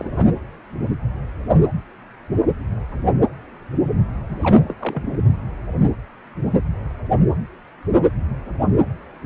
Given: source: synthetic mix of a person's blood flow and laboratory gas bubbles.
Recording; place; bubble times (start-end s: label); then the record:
Doppler ultrasound of blood flow; precordium
0.00-0.27 s: bubbles
4.29-4.36 s: bubbles
4.41-4.74 s: bubbles
4.79-5.19 s: bubbles
From the record:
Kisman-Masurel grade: 221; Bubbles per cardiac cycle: several, 3 to 8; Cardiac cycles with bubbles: 10 to 50%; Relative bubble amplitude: barely perceptible (0.100 to 0.250); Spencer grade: 2 (many but less than half of the cardiac periods contain bubble signals, singularly or in groups); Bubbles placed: anywhere in the cardiac cycle